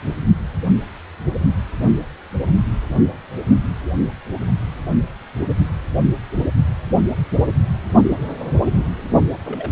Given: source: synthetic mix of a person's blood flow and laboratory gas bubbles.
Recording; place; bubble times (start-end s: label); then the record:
Doppler ultrasound of blood flow; precordium
9.45-9.72 s: bubbles
From the record:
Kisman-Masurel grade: 221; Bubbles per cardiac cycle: several, 3 to 8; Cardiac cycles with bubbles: 10 to 50%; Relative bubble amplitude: barely perceptible (0.100 to 0.250); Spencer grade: 2 (many but less than half of the cardiac periods contain bubble signals, singularly or in groups); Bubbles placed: only in the low amplitude regions of the cardiac cycle